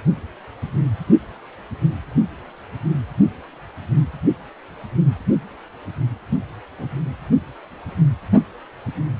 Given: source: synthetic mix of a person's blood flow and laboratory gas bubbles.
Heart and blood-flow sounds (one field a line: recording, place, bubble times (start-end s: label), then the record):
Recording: Doppler ultrasound of blood flow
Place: precordium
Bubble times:
6.30-6.37 s: bubbles
6.77-6.86 s: bubbles
From the record:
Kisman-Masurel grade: 121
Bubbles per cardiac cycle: 1 to 2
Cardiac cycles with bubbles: 10 to 50%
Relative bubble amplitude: barely perceptible (0.100 to 0.250)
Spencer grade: 2 (many but less than half of the cardiac periods contain bubble signals, singularly or in groups)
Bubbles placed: anywhere in the cardiac cycle